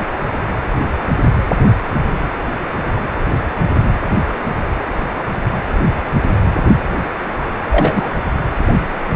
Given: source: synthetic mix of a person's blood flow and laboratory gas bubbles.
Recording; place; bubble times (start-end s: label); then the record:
Doppler ultrasound of blood flow; precordium
7.71-8.10 s: bubbles
From the record:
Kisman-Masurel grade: 113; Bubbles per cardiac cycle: 1 to 2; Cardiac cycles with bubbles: 1 to 10%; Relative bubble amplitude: loud (0.450 to 0.775); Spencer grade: 1 (occasional bubble signal discernible with the cardiac motion signal, with majority of cardiac periods free of bubbles); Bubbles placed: anywhere in the cardiac cycle